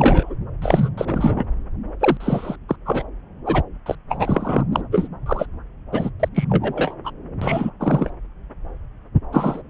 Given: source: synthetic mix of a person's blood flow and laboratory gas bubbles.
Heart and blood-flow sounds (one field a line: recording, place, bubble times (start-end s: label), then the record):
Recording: Doppler ultrasound of blood flow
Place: subclavian vein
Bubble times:
0.00-0.36 s: bubbles
0.61-0.90 s: bubbles
0.97-1.45 s: bubbles
2.00-2.17 s: bubbles
2.20-2.56 s: bubbles
2.69-2.76 s: bubbles
2.85-3.02 s: bubbles
3.46-3.62 s: bubbles
3.86-3.95 s: bubbles
4.09-4.63 s: bubbles
4.72-4.81 s: bubbles
4.92-5.08 s: bubbles
5.26-5.46 s: bubbles
5.92-6.09 s: bubbles
6.19-6.28 s: bubbles
6.34-6.44 s: bubbles
6.49-6.94 s: bubbles
7.04-7.11 s: bubbles
7.42-7.70 s: bubbles
7.79-8.10 s: bubbles
9.32-9.62 s: bubbles
From the record:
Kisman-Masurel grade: 243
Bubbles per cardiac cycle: several, 3 to 8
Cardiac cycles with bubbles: 100%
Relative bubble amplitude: loud (0.450 to 0.775)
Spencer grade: 3 (all of the cardiac periods contain showers or single bubble signals, but not dominating or overriding the cardiac motion signals)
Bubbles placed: anywhere in the cardiac cycle